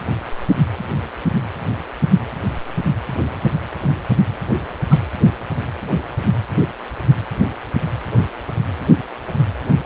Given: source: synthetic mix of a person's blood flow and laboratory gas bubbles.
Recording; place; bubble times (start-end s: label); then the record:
Doppler ultrasound of blood flow; precordium
4.90-5.00 s: bubbles
From the record:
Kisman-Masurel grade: 111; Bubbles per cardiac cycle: 1 to 2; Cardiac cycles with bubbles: 1 to 10%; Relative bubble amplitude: barely perceptible (0.100 to 0.250); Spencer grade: 1 (occasional bubble signal discernible with the cardiac motion signal, with majority of cardiac periods free of bubbles); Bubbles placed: anywhere in the cardiac cycle